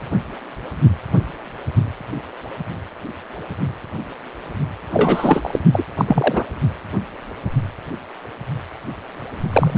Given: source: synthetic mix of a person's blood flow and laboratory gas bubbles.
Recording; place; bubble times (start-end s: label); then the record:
Doppler ultrasound of blood flow; precordium
4.91-5.59 s: bubbles
5.72-5.83 s: bubbles
5.97-6.05 s: bubbles
6.08-6.45 s: bubbles
9.53-9.78 s: bubbles
From the record:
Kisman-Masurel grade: 223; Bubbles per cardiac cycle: several, 3 to 8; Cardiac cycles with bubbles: 10 to 50%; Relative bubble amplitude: loud (0.450 to 0.775); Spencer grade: 2 (many but less than half of the cardiac periods contain bubble signals, singularly or in groups); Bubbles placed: only in the low amplitude regions of the cardiac cycle